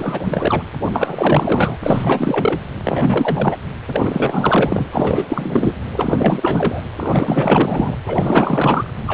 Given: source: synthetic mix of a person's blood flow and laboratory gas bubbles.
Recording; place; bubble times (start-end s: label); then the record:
Doppler ultrasound of blood flow; precordium
0.00-0.63 s: bubbles
0.92-1.77 s: bubbles
1.83-2.60 s: bubbles
2.85-3.58 s: bubbles
3.89-4.86 s: bubbles
4.92-5.26 s: bubbles
5.28-5.72 s: bubbles
5.95-6.81 s: bubbles
6.99-7.96 s: bubbles
8.05-8.94 s: bubbles
9.06-9.14 s: bubbles
From the record:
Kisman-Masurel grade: 444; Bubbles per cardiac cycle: continuous sound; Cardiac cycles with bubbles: 100%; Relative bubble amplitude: maximal (0.775 to 0.999); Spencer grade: 4 (maximum detectable bubble signal sounding continuously throughout systole and diastole of every cardiac period, and overriding the amplitude of the normal cardiac signals); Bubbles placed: anywhere in the cardiac cycle